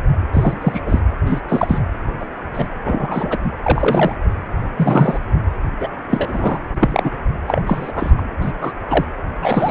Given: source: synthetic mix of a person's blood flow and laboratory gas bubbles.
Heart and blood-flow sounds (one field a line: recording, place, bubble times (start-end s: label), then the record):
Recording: Doppler ultrasound of blood flow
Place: precordium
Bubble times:
0.33-0.57 s: bubbles
0.61-0.82 s: bubbles
0.86-0.99 s: bubbles
1.25-1.42 s: bubbles
1.48-1.78 s: bubbles
2.20-2.25 s: bubbles
2.53-2.67 s: bubbles
2.84-3.38 s: bubbles
3.44-3.51 s: bubbles
3.62-4.17 s: bubbles
4.76-5.19 s: bubbles
5.80-5.88 s: bubbles
6.09-6.58 s: bubbles
6.74-7.10 s: bubbles
7.47-7.62 s: bubbles
7.67-7.92 s: bubbles
7.95-8.11 s: bubbles
8.17-8.22 s: bubbles
8.41-8.52 s: bubbles
8.61-8.73 s: bubbles
8.87-9.05 s: bubbles
9.41-9.71 s: bubbles
From the record:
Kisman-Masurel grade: 243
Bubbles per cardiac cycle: several, 3 to 8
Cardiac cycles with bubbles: 100%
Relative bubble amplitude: loud (0.450 to 0.775)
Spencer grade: 3 (all of the cardiac periods contain showers or single bubble signals, but not dominating or overriding the cardiac motion signals)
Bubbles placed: anywhere in the cardiac cycle